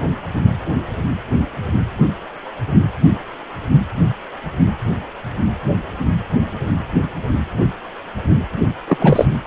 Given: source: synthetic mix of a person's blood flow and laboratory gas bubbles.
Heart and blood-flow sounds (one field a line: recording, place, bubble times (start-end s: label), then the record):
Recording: Doppler ultrasound of blood flow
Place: precordium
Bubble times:
8.88-9.25 s: bubbles
From the record:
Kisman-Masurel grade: 213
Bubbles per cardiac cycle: several, 3 to 8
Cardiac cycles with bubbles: 1 to 10%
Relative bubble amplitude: loud (0.450 to 0.775)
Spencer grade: 1 (occasional bubble signal discernible with the cardiac motion signal, with majority of cardiac periods free of bubbles)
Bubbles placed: anywhere in the cardiac cycle